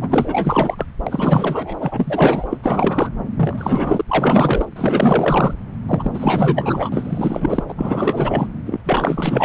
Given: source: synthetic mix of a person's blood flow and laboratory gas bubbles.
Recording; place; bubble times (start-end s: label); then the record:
Doppler ultrasound of blood flow; subclavian vein
0.00-0.86 s: bubbles
1.06-1.75 s: bubbles
1.79-2.57 s: bubbles
2.63-3.09 s: bubbles
3.37-4.02 s: bubbles
4.08-4.66 s: bubbles
4.76-5.54 s: bubbles
5.87-7.64 s: bubbles
7.68-7.73 s: bubbles
7.77-8.47 s: bubbles
8.65-8.80 s: bubbles
8.84-9.45 s: bubbles
From the record:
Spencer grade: 4 (maximum detectable bubble signal sounding continuously throughout systole and diastole of every cardiac period, and overriding the amplitude of the normal cardiac signals); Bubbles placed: anywhere in the cardiac cycle